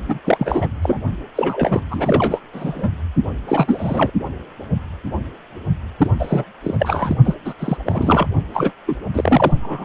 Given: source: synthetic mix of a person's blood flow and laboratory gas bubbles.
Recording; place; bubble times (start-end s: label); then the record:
Doppler ultrasound of blood flow; precordium
0.08-0.18 s: bubbles
0.24-0.69 s: bubbles
0.82-1.00 s: bubbles
1.36-1.81 s: bubbles
1.90-2.41 s: bubbles
2.53-2.90 s: bubbles
3.47-4.10 s: bubbles
5.98-6.09 s: bubbles
6.18-6.44 s: bubbles
6.63-7.14 s: bubbles
7.24-7.35 s: bubbles
7.44-7.54 s: bubbles
7.59-7.77 s: bubbles
7.85-8.27 s: bubbles
8.54-8.71 s: bubbles
8.87-8.95 s: bubbles
9.13-9.52 s: bubbles
9.61-9.85 s: bubbles
From the record:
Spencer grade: 3 (all of the cardiac periods contain showers or single bubble signals, but not dominating or overriding the cardiac motion signals); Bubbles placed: only in the low amplitude regions of the cardiac cycle